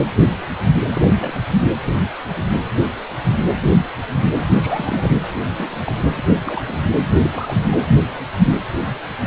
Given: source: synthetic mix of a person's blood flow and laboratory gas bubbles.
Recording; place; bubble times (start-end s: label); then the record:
Doppler ultrasound of blood flow; precordium
0.93-1.08 s: bubbles
1.19-1.31 s: bubbles
1.35-1.42 s: bubbles
4.38-5.10 s: bubbles
5.55-5.82 s: bubbles
5.85-5.92 s: bubbles
6.17-6.22 s: bubbles
6.46-6.62 s: bubbles
6.68-6.79 s: bubbles
7.21-7.56 s: bubbles
7.67-7.91 s: bubbles
From the record:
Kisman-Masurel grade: 221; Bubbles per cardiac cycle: several, 3 to 8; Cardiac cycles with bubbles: 10 to 50%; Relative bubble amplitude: barely perceptible (0.100 to 0.250); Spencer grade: 2 (many but less than half of the cardiac periods contain bubble signals, singularly or in groups); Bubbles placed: anywhere in the cardiac cycle